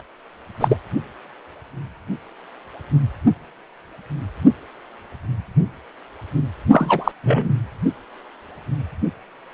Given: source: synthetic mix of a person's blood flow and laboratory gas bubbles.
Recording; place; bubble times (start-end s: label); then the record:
Doppler ultrasound of blood flow; precordium
0.59-0.77 s: bubbles
6.72-7.12 s: bubbles
7.23-7.54 s: bubbles
From the record:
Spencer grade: 2 (many but less than half of the cardiac periods contain bubble signals, singularly or in groups); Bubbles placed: only in the low amplitude regions of the cardiac cycle